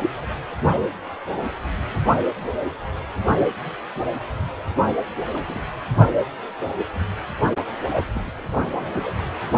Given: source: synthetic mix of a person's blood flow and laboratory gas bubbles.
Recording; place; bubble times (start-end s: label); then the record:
Doppler ultrasound of blood flow; precordium
5.33-5.68 s: bubbles
7.90-8.05 s: bubbles
8.15-8.21 s: bubbles
8.24-8.30 s: bubbles
8.35-8.42 s: bubbles
8.49-8.80 s: bubbles
8.83-9.10 s: bubbles
From the record:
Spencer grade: 2 (many but less than half of the cardiac periods contain bubble signals, singularly or in groups); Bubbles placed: anywhere in the cardiac cycle